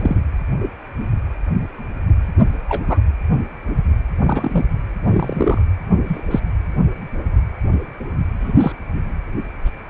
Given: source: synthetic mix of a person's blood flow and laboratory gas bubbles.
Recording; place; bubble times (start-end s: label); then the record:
Doppler ultrasound of blood flow; precordium
0.00-0.16 s: bubbles
2.69-2.81 s: bubbles
2.88-2.98 s: bubbles
4.25-4.64 s: bubbles
5.06-5.60 s: bubbles
6.04-6.22 s: bubbles
6.30-6.40 s: bubbles
8.40-8.72 s: bubbles
From the record:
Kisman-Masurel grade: 122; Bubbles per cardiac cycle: 1 to 2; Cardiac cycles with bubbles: 10 to 50%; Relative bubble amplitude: moderate (0.250 to 0.450); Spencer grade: 2 (many but less than half of the cardiac periods contain bubble signals, singularly or in groups); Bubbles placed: anywhere in the cardiac cycle